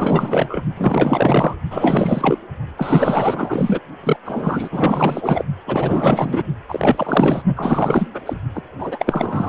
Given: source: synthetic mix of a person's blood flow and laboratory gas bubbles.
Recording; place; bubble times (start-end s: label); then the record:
Doppler ultrasound of blood flow; precordium
0.00-0.61 s: bubbles
0.77-1.55 s: bubbles
1.71-2.38 s: bubbles
2.77-3.80 s: bubbles
4.04-4.17 s: bubbles
4.25-5.44 s: bubbles
5.66-6.43 s: bubbles
6.68-7.42 s: bubbles
7.56-8.09 s: bubbles
8.13-8.21 s: bubbles
8.25-8.35 s: bubbles
8.54-8.62 s: bubbles
8.79-9.49 s: bubbles
From the record:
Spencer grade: 4 (maximum detectable bubble signal sounding continuously throughout systole and diastole of every cardiac period, and overriding the amplitude of the normal cardiac signals); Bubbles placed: only in the low amplitude regions of the cardiac cycle